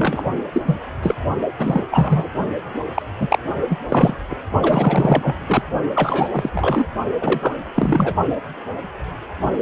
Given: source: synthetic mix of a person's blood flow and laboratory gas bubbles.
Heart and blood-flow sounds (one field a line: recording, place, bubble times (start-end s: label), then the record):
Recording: Doppler ultrasound of blood flow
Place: precordium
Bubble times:
0.00-0.30 s: bubbles
0.52-0.61 s: bubbles
0.65-0.76 s: bubbles
1.02-1.15 s: bubbles
1.57-1.85 s: bubbles
1.91-2.30 s: bubbles
2.94-3.02 s: bubbles
3.19-3.39 s: bubbles
3.69-3.78 s: bubbles
3.88-4.15 s: bubbles
4.30-4.38 s: bubbles
4.62-5.36 s: bubbles
5.47-5.62 s: bubbles
5.95-6.29 s: bubbles
6.32-6.50 s: bubbles
6.53-6.86 s: bubbles
7.21-7.57 s: bubbles
7.76-8.14 s: bubbles
From the record:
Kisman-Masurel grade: 333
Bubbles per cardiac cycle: rolling drumbeat, 9 or more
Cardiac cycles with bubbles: 50 to 99%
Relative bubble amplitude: loud (0.450 to 0.775)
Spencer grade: 3 (all of the cardiac periods contain showers or single bubble signals, but not dominating or overriding the cardiac motion signals)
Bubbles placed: only in the low amplitude regions of the cardiac cycle